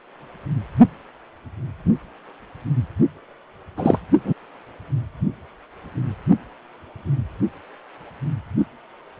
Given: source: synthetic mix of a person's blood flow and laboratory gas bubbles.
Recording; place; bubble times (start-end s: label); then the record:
Doppler ultrasound of blood flow; precordium
3.77-3.99 s: bubbles
4.24-4.33 s: bubbles
From the record:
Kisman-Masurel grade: 123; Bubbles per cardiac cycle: 1 to 2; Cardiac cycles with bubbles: 10 to 50%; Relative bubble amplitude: loud (0.450 to 0.775); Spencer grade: 2 (many but less than half of the cardiac periods contain bubble signals, singularly or in groups); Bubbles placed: only in the low amplitude regions of the cardiac cycle